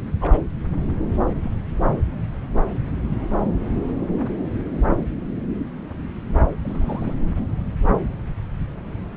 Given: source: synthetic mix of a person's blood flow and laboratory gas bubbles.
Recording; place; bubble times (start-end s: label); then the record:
Doppler ultrasound of blood flow; subclavian vein
0.21-0.43 s: bubbles
1.42-1.51 s: bubbles
1.89-2.03 s: bubbles
6.62-7.14 s: bubbles
From the record:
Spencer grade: 2 (many but less than half of the cardiac periods contain bubble signals, singularly or in groups); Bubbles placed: anywhere in the cardiac cycle